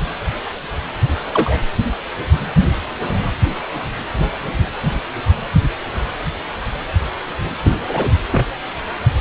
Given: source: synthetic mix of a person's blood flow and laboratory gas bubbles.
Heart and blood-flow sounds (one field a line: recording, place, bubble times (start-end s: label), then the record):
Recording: Doppler ultrasound of blood flow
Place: precordium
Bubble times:
1.33-1.60 s: bubbles
7.63-7.77 s: bubbles
7.88-8.11 s: bubbles
8.30-8.46 s: bubbles
From the record:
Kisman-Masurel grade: 123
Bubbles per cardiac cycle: 1 to 2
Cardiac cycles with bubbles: 10 to 50%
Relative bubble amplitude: loud (0.450 to 0.775)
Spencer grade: 2 (many but less than half of the cardiac periods contain bubble signals, singularly or in groups)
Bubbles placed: anywhere in the cardiac cycle